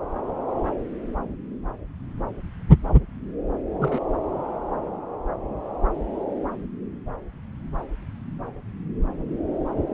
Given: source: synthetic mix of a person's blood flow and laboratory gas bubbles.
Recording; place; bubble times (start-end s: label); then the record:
Doppler ultrasound of blood flow; subclavian vein
3.79-4.00 s: bubbles
From the record:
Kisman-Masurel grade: 121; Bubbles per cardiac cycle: 1 to 2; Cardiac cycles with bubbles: 10 to 50%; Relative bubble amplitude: barely perceptible (0.100 to 0.250); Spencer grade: 2 (many but less than half of the cardiac periods contain bubble signals, singularly or in groups); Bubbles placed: anywhere in the cardiac cycle